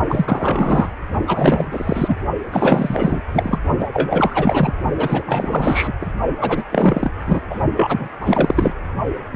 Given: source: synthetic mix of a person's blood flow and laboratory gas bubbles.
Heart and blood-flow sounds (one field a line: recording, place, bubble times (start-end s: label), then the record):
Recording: Doppler ultrasound of blood flow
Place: precordium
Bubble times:
0.07-0.88 s: bubbles
1.26-2.15 s: bubbles
2.52-3.22 s: bubbles
3.33-3.58 s: bubbles
3.79-3.87 s: bubbles
3.93-4.74 s: bubbles
4.96-5.93 s: bubbles
6.01-6.06 s: bubbles
6.41-6.63 s: bubbles
6.72-7.11 s: bubbles
7.26-7.42 s: bubbles
7.50-7.59 s: bubbles
7.76-8.08 s: bubbles
8.21-8.74 s: bubbles
9.32-9.35 s: bubbles
From the record:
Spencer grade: 4 (maximum detectable bubble signal sounding continuously throughout systole and diastole of every cardiac period, and overriding the amplitude of the normal cardiac signals)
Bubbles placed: only in the low amplitude regions of the cardiac cycle